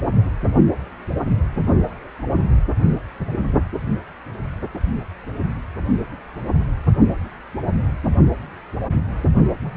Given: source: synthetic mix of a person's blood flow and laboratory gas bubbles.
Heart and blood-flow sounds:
Doppler ultrasound of blood flow; precordium
9.63-9.77 s: bubbles
From the record:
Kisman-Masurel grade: 211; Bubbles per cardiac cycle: several, 3 to 8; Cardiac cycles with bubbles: 1 to 10%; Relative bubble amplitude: barely perceptible (0.100 to 0.250); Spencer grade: 1 (occasional bubble signal discernible with the cardiac motion signal, with majority of cardiac periods free of bubbles); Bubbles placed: only in the low amplitude regions of the cardiac cycle

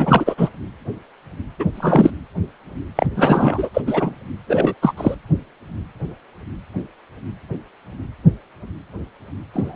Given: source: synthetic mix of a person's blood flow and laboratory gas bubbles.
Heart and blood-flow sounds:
Doppler ultrasound of blood flow; precordium
0.00-0.35 s: bubbles
0.38-0.49 s: bubbles
1.59-1.65 s: bubbles
1.75-2.10 s: bubbles
2.96-3.06 s: bubbles
3.16-3.69 s: bubbles
3.74-3.81 s: bubbles
3.87-4.15 s: bubbles
4.46-4.75 s: bubbles
4.81-4.92 s: bubbles
4.97-5.14 s: bubbles
9.54-9.76 s: bubbles
From the record:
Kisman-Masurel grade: 223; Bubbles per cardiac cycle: several, 3 to 8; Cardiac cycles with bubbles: 10 to 50%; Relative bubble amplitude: loud (0.450 to 0.775); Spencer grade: 2 (many but less than half of the cardiac periods contain bubble signals, singularly or in groups); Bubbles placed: anywhere in the cardiac cycle

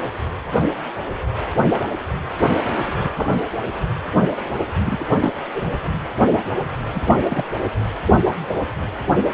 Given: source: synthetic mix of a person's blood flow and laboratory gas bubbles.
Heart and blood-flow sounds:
Doppler ultrasound of blood flow; precordium
2.62-2.96 s: bubbles
3.04-3.10 s: bubbles
3.16-3.29 s: bubbles
4.77-5.04 s: bubbles
5.20-5.37 s: bubbles
5.54-5.71 s: bubbles
6.94-7.02 s: bubbles
7.06-7.18 s: bubbles
7.30-7.45 s: bubbles
From the record:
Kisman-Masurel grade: 222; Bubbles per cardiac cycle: several, 3 to 8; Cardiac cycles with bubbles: 10 to 50%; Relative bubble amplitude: moderate (0.250 to 0.450); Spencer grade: 2 (many but less than half of the cardiac periods contain bubble signals, singularly or in groups); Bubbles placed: anywhere in the cardiac cycle

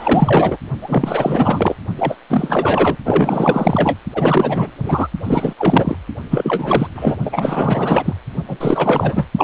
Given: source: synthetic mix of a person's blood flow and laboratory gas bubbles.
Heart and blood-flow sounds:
Doppler ultrasound of blood flow; precordium
0.00-0.57 s: bubbles
0.81-1.76 s: bubbles
1.96-2.17 s: bubbles
2.29-2.97 s: bubbles
3.05-3.99 s: bubbles
4.14-4.71 s: bubbles
4.82-5.08 s: bubbles
5.23-5.53 s: bubbles
5.58-5.97 s: bubbles
6.30-6.87 s: bubbles
6.95-7.17 s: bubbles
7.25-8.14 s: bubbles
8.48-9.26 s: bubbles
9.38-9.44 s: bubbles
From the record:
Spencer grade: 4 (maximum detectable bubble signal sounding continuously throughout systole and diastole of every cardiac period, and overriding the amplitude of the normal cardiac signals); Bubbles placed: only in the low amplitude regions of the cardiac cycle

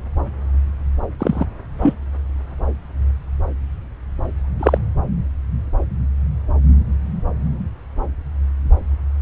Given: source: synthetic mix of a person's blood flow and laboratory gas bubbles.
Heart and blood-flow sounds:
Doppler ultrasound of blood flow; subclavian vein
1.19-1.46 s: bubbles
1.82-1.94 s: bubbles
4.59-4.78 s: bubbles
From the record:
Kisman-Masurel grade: 123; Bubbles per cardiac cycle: 1 to 2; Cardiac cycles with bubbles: 10 to 50%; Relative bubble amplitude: loud (0.450 to 0.775); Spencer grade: 2 (many but less than half of the cardiac periods contain bubble signals, singularly or in groups); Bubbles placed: anywhere in the cardiac cycle

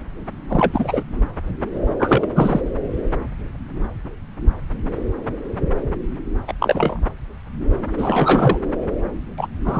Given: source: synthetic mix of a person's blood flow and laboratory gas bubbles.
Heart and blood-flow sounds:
Doppler ultrasound of blood flow; subclavian vein
0.49-1.03 s: bubbles
1.99-2.27 s: bubbles
2.35-2.60 s: bubbles
6.47-6.54 s: bubbles
6.60-7.00 s: bubbles
7.98-8.58 s: bubbles
9.38-9.47 s: bubbles
9.64-9.80 s: bubbles
From the record:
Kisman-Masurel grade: 223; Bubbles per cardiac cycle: several, 3 to 8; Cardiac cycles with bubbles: 10 to 50%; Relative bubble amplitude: loud (0.450 to 0.775); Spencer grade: 2 (many but less than half of the cardiac periods contain bubble signals, singularly or in groups); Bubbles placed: anywhere in the cardiac cycle

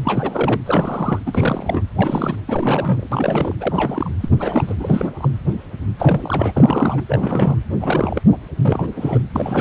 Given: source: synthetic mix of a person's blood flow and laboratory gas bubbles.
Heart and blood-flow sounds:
Doppler ultrasound of blood flow; precordium
0.04-0.61 s: bubbles
0.65-1.21 s: bubbles
1.26-1.82 s: bubbles
1.95-2.36 s: bubbles
2.46-3.07 s: bubbles
3.11-3.55 s: bubbles
3.60-4.09 s: bubbles
4.20-4.29 s: bubbles
4.38-4.75 s: bubbles
4.79-5.29 s: bubbles
5.98-7.01 s: bubbles
7.08-7.55 s: bubbles
7.81-8.21 s: bubbles
8.32-8.37 s: bubbles
8.61-8.90 s: bubbles
8.96-9.21 s: bubbles
9.35-9.61 s: bubbles
From the record:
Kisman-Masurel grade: 332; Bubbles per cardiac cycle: rolling drumbeat, 9 or more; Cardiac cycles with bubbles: 50 to 99%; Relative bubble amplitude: moderate (0.250 to 0.450); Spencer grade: 3 (all of the cardiac periods contain showers or single bubble signals, but not dominating or overriding the cardiac motion signals); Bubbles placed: anywhere in the cardiac cycle

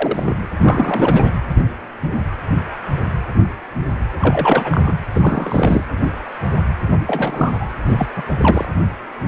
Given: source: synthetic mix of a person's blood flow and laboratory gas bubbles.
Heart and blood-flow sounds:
Doppler ultrasound of blood flow; precordium
0.00-0.35 s: bubbles
0.60-1.30 s: bubbles
4.19-5.05 s: bubbles
5.12-5.83 s: bubbles
6.88-7.71 s: bubbles
7.88-8.07 s: bubbles
8.15-8.22 s: bubbles
8.38-8.65 s: bubbles
From the record:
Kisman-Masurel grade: 332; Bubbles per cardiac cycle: rolling drumbeat, 9 or more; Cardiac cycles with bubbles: 50 to 99%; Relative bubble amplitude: moderate (0.250 to 0.450); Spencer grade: 3 (all of the cardiac periods contain showers or single bubble signals, but not dominating or overriding the cardiac motion signals); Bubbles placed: anywhere in the cardiac cycle

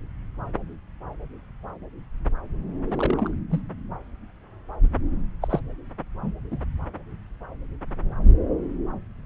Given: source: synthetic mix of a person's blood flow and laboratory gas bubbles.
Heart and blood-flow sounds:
Doppler ultrasound of blood flow; subclavian vein
2.90-3.34 s: bubbles
3.50-3.61 s: bubbles
5.42-5.47 s: bubbles
5.50-5.60 s: bubbles
6.21-6.32 s: bubbles
6.51-6.58 s: bubbles
From the record:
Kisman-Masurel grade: 221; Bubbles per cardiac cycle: several, 3 to 8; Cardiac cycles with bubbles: 10 to 50%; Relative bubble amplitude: barely perceptible (0.100 to 0.250); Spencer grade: 2 (many but less than half of the cardiac periods contain bubble signals, singularly or in groups); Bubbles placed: anywhere in the cardiac cycle

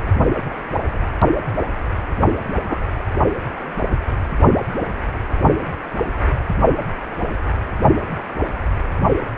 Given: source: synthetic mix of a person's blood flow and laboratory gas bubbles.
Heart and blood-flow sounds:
Doppler ultrasound of blood flow; precordium
2.33-2.38 s: bubbles
2.69-2.79 s: bubbles
From the record:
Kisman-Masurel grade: 112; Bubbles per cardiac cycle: 1 to 2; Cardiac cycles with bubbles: 1 to 10%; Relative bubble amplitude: moderate (0.250 to 0.450); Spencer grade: 1 (occasional bubble signal discernible with the cardiac motion signal, with majority of cardiac periods free of bubbles); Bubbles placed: only in the low amplitude regions of the cardiac cycle

